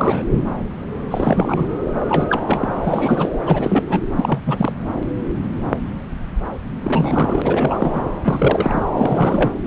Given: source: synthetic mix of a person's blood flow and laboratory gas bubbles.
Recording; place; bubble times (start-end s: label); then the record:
Doppler ultrasound of blood flow; subclavian vein
0.00-0.22 s: bubbles
1.10-1.67 s: bubbles
2.07-2.44 s: bubbles
2.47-2.74 s: bubbles
2.84-3.30 s: bubbles
3.46-3.84 s: bubbles
3.90-4.03 s: bubbles
4.16-4.38 s: bubbles
4.46-4.73 s: bubbles
6.83-8.02 s: bubbles
8.24-8.83 s: bubbles
8.95-9.52 s: bubbles
From the record:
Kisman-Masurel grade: 332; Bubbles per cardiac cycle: rolling drumbeat, 9 or more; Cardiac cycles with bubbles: 50 to 99%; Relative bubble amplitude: moderate (0.250 to 0.450); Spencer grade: 3 (all of the cardiac periods contain showers or single bubble signals, but not dominating or overriding the cardiac motion signals); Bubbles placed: anywhere in the cardiac cycle